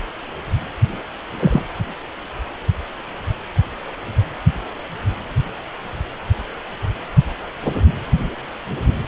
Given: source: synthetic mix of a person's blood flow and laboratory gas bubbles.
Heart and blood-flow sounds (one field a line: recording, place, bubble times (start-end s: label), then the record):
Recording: Doppler ultrasound of blood flow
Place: precordium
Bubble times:
1.39-1.62 s: bubbles
From the record:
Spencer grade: 1 (occasional bubble signal discernible with the cardiac motion signal, with majority of cardiac periods free of bubbles)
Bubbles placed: anywhere in the cardiac cycle